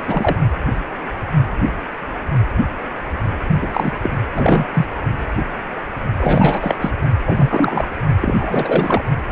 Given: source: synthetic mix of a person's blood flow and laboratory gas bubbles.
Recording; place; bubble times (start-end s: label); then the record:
Doppler ultrasound of blood flow; precordium
0.08-0.36 s: bubbles
3.61-3.92 s: bubbles
4.03-4.10 s: bubbles
4.35-4.66 s: bubbles
4.74-4.86 s: bubbles
6.18-6.77 s: bubbles
6.81-6.91 s: bubbles
7.27-7.88 s: bubbles
8.21-9.02 s: bubbles
From the record:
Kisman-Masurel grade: 333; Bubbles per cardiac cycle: rolling drumbeat, 9 or more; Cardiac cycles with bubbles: 50 to 99%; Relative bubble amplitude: loud (0.450 to 0.775); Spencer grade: 3 (all of the cardiac periods contain showers or single bubble signals, but not dominating or overriding the cardiac motion signals); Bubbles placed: only in the low amplitude regions of the cardiac cycle